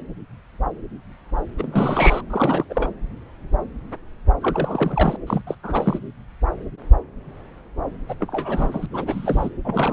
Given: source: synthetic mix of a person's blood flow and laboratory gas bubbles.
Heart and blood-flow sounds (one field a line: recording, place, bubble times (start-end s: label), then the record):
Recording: Doppler ultrasound of blood flow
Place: subclavian vein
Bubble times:
1.57-2.22 s: bubbles
2.30-2.65 s: bubbles
2.69-2.90 s: bubbles
4.41-5.17 s: bubbles
5.27-5.42 s: bubbles
5.47-5.55 s: bubbles
5.63-5.99 s: bubbles
8.09-8.15 s: bubbles
8.20-8.86 s: bubbles
8.92-9.50 s: bubbles
9.64-9.93 s: bubbles
From the record:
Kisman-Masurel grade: 332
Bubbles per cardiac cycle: rolling drumbeat, 9 or more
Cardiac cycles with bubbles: 50 to 99%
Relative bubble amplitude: moderate (0.250 to 0.450)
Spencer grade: 3 (all of the cardiac periods contain showers or single bubble signals, but not dominating or overriding the cardiac motion signals)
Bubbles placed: anywhere in the cardiac cycle